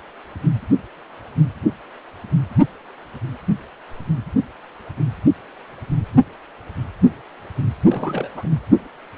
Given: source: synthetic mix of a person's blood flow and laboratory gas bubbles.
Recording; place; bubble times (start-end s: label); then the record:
Doppler ultrasound of blood flow; precordium
7.84-8.29 s: bubbles
8.34-8.50 s: bubbles
From the record:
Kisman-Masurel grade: 211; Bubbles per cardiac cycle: several, 3 to 8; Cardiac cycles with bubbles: 1 to 10%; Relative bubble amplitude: barely perceptible (0.100 to 0.250); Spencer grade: 1 (occasional bubble signal discernible with the cardiac motion signal, with majority of cardiac periods free of bubbles); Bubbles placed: anywhere in the cardiac cycle